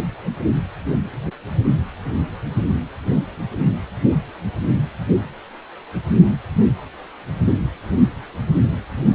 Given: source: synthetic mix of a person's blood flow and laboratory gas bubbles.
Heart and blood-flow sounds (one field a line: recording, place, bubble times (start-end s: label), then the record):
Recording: Doppler ultrasound of blood flow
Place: precordium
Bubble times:
no bubbles
From the record:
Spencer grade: 0 (complete lack of bubble signals)